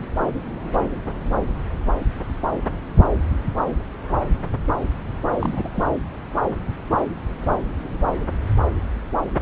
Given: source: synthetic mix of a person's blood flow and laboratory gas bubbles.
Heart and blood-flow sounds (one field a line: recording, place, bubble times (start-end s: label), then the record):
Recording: Doppler ultrasound of blood flow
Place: subclavian vein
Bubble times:
5.39-5.71 s: bubbles
5.74-5.91 s: bubbles
From the record:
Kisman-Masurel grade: 221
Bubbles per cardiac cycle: several, 3 to 8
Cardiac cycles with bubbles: 10 to 50%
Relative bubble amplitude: barely perceptible (0.100 to 0.250)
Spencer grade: 2 (many but less than half of the cardiac periods contain bubble signals, singularly or in groups)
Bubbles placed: anywhere in the cardiac cycle